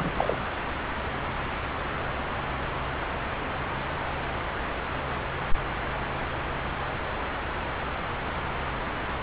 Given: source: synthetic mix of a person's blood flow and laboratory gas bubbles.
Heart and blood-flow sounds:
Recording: Doppler ultrasound of blood flow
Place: subclavian vein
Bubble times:
0.00-0.39 s: bubbles
From the record:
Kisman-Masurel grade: 213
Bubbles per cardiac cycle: several, 3 to 8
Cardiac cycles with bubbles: 1 to 10%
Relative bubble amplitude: loud (0.450 to 0.775)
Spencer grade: 1 (occasional bubble signal discernible with the cardiac motion signal, with majority of cardiac periods free of bubbles)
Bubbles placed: anywhere in the cardiac cycle

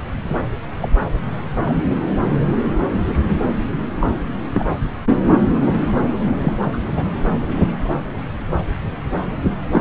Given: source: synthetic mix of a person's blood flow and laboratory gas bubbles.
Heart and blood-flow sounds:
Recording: Doppler ultrasound of blood flow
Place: subclavian vein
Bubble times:
0.23-0.42 s: bubbles
0.82-0.89 s: bubbles
1.00-1.06 s: bubbles
1.65-1.75 s: bubbles
3.96-4.07 s: bubbles
4.54-4.64 s: bubbles
6.42-6.53 s: bubbles
6.62-6.78 s: bubbles
6.88-7.04 s: bubbles
9.71-9.81 s: bubbles
From the record:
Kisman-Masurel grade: 122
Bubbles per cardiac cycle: 1 to 2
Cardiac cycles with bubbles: 10 to 50%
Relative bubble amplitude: moderate (0.250 to 0.450)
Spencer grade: 2 (many but less than half of the cardiac periods contain bubble signals, singularly or in groups)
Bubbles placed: anywhere in the cardiac cycle

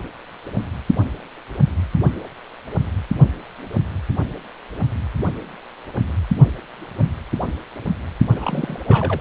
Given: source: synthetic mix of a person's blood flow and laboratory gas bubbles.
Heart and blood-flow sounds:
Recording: Doppler ultrasound of blood flow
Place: precordium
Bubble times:
8.36-8.80 s: bubbles
8.88-9.21 s: bubbles
From the record:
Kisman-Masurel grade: 221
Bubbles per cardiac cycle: several, 3 to 8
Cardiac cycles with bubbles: 10 to 50%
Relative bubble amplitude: barely perceptible (0.100 to 0.250)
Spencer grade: 2 (many but less than half of the cardiac periods contain bubble signals, singularly or in groups)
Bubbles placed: anywhere in the cardiac cycle

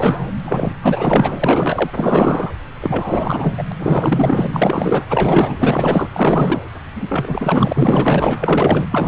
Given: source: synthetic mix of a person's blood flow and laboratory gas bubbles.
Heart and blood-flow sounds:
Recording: Doppler ultrasound of blood flow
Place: subclavian vein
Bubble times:
0.00-0.16 s: bubbles
0.45-0.74 s: bubbles
0.81-1.39 s: bubbles
1.42-1.91 s: bubbles
1.94-2.50 s: bubbles
2.81-3.63 s: bubbles
3.70-3.72 s: bubbles
3.79-4.47 s: bubbles
4.53-5.05 s: bubbles
5.09-6.10 s: bubbles
6.13-6.61 s: bubbles
6.95-8.87 s: bubbles
8.90-9.08 s: bubbles
From the record:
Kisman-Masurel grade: 444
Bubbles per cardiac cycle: continuous sound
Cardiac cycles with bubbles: 100%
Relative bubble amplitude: maximal (0.775 to 0.999)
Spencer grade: 4 (maximum detectable bubble signal sounding continuously throughout systole and diastole of every cardiac period, and overriding the amplitude of the normal cardiac signals)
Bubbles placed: anywhere in the cardiac cycle

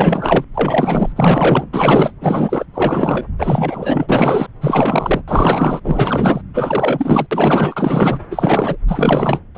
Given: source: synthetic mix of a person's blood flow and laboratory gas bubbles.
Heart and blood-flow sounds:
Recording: Doppler ultrasound of blood flow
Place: subclavian vein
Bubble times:
0.00-0.44 s: bubbles
0.54-1.12 s: bubbles
1.16-1.68 s: bubbles
1.73-2.13 s: bubbles
2.21-2.65 s: bubbles
2.73-3.27 s: bubbles
3.38-4.47 s: bubbles
4.61-5.22 s: bubbles
5.28-5.80 s: bubbles
5.84-6.41 s: bubbles
6.54-7.27 s: bubbles
7.31-8.19 s: bubbles
8.31-8.77 s: bubbles
8.88-9.39 s: bubbles
9.54-9.58 s: bubbles
From the record:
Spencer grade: 4 (maximum detectable bubble signal sounding continuously throughout systole and diastole of every cardiac period, and overriding the amplitude of the normal cardiac signals)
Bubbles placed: anywhere in the cardiac cycle

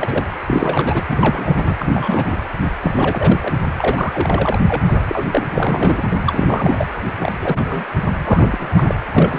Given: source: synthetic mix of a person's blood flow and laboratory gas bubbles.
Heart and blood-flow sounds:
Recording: Doppler ultrasound of blood flow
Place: precordium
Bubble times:
0.00-0.24 s: bubbles
0.46-1.02 s: bubbles
1.09-1.76 s: bubbles
1.79-2.36 s: bubbles
2.81-3.54 s: bubbles
3.78-4.59 s: bubbles
4.67-5.04 s: bubbles
5.08-5.29 s: bubbles
5.32-5.48 s: bubbles
5.54-6.14 s: bubbles
6.26-6.87 s: bubbles
7.20-7.33 s: bubbles
7.42-7.83 s: bubbles
8.24-8.95 s: bubbles
9.15-9.39 s: bubbles
From the record:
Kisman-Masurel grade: 342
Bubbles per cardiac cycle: rolling drumbeat, 9 or more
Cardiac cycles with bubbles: 100%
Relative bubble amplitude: moderate (0.250 to 0.450)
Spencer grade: 3 (all of the cardiac periods contain showers or single bubble signals, but not dominating or overriding the cardiac motion signals)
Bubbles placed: anywhere in the cardiac cycle

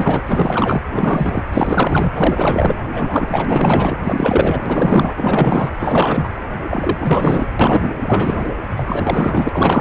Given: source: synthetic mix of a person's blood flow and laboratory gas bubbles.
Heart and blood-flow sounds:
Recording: Doppler ultrasound of blood flow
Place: precordium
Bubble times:
0.00-0.21 s: bubbles
0.26-0.81 s: bubbles
0.92-1.43 s: bubbles
1.52-2.10 s: bubbles
2.15-2.78 s: bubbles
2.91-3.98 s: bubbles
4.04-5.71 s: bubbles
5.79-6.29 s: bubbles
6.70-7.54 s: bubbles
7.59-7.94 s: bubbles
8.03-8.50 s: bubbles
8.76-9.81 s: bubbles
From the record:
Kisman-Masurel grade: 444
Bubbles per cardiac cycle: continuous sound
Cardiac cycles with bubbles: 100%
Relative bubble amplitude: maximal (0.775 to 0.999)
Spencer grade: 4 (maximum detectable bubble signal sounding continuously throughout systole and diastole of every cardiac period, and overriding the amplitude of the normal cardiac signals)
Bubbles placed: anywhere in the cardiac cycle

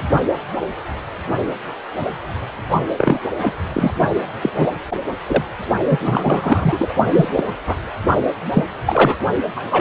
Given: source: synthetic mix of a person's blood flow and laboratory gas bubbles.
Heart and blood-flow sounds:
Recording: Doppler ultrasound of blood flow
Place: precordium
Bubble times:
2.97-3.20 s: bubbles
3.41-3.54 s: bubbles
3.73-3.92 s: bubbles
4.42-4.50 s: bubbles
4.55-4.67 s: bubbles
5.27-5.44 s: bubbles
5.90-6.93 s: bubbles
7.08-7.29 s: bubbles
7.34-7.44 s: bubbles
7.67-7.75 s: bubbles
8.54-8.64 s: bubbles
8.86-9.17 s: bubbles
9.56-9.81 s: bubbles
From the record:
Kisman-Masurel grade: 233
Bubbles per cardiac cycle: several, 3 to 8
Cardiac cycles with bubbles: 50 to 99%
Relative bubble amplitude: loud (0.450 to 0.775)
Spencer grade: 3 (all of the cardiac periods contain showers or single bubble signals, but not dominating or overriding the cardiac motion signals)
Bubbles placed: only in the low amplitude regions of the cardiac cycle

